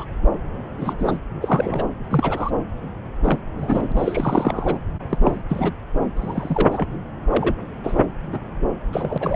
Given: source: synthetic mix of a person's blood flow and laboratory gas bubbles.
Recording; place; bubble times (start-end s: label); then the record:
Doppler ultrasound of blood flow; subclavian vein
0.00-0.05 s: bubbles
0.77-1.18 s: bubbles
1.42-1.85 s: bubbles
2.10-2.51 s: bubbles
3.23-3.39 s: bubbles
3.58-3.92 s: bubbles
3.97-4.78 s: bubbles
5.09-5.18 s: bubbles
5.21-5.41 s: bubbles
5.49-5.72 s: bubbles
6.16-6.69 s: bubbles
6.71-6.88 s: bubbles
7.31-7.54 s: bubbles
7.83-8.05 s: bubbles
8.32-8.39 s: bubbles
8.92-9.36 s: bubbles
From the record:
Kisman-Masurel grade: 242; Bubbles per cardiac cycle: several, 3 to 8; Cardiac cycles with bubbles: 100%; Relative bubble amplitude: moderate (0.250 to 0.450); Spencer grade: 3 (all of the cardiac periods contain showers or single bubble signals, but not dominating or overriding the cardiac motion signals); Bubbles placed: anywhere in the cardiac cycle